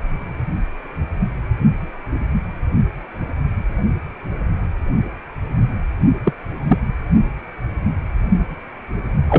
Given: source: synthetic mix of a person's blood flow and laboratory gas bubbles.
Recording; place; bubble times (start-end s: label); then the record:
Doppler ultrasound of blood flow; precordium
6.25-6.33 s: bubbles
6.67-6.78 s: bubbles
9.28-9.39 s: bubbles
From the record:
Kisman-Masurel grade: 123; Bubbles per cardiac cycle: 1 to 2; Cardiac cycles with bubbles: 10 to 50%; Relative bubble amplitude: loud (0.450 to 0.775); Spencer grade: 2 (many but less than half of the cardiac periods contain bubble signals, singularly or in groups); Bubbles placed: only in the low amplitude regions of the cardiac cycle